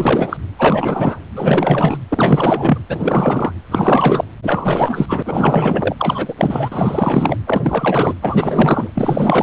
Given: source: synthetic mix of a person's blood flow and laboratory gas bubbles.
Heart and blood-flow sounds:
Doppler ultrasound of blood flow; precordium
0.00-0.37 s: bubbles
0.58-1.19 s: bubbles
1.34-1.98 s: bubbles
2.08-2.78 s: bubbles
2.88-3.52 s: bubbles
3.71-4.24 s: bubbles
4.42-5.22 s: bubbles
5.25-5.96 s: bubbles
5.98-6.33 s: bubbles
6.38-7.37 s: bubbles
7.46-8.14 s: bubbles
8.21-8.91 s: bubbles
8.95-9.43 s: bubbles
From the record:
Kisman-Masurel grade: 444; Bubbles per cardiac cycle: continuous sound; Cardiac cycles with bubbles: 100%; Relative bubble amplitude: maximal (0.775 to 0.999); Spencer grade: 4 (maximum detectable bubble signal sounding continuously throughout systole and diastole of every cardiac period, and overriding the amplitude of the normal cardiac signals); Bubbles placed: anywhere in the cardiac cycle

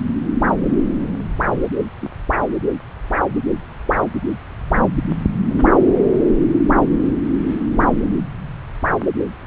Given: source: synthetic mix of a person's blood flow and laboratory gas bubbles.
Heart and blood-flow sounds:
Doppler ultrasound of blood flow; subclavian vein
2.02-2.09 s: bubbles
2.37-2.41 s: bubbles
5.48-5.69 s: bubbles
From the record:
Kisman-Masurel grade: 121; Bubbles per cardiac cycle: 1 to 2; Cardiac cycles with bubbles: 10 to 50%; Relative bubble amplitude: barely perceptible (0.100 to 0.250); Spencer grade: 2 (many but less than half of the cardiac periods contain bubble signals, singularly or in groups); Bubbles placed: anywhere in the cardiac cycle

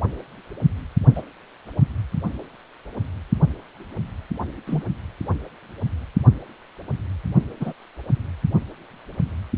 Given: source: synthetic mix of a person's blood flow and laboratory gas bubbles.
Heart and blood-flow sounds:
Doppler ultrasound of blood flow; precordium
1.14-1.22 s: bubbles
4.67-4.83 s: bubbles
7.60-7.73 s: bubbles
From the record:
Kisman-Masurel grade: 122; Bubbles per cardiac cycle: 1 to 2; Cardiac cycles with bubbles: 10 to 50%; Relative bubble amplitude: moderate (0.250 to 0.450); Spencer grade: 2 (many but less than half of the cardiac periods contain bubble signals, singularly or in groups); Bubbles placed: only in the low amplitude regions of the cardiac cycle

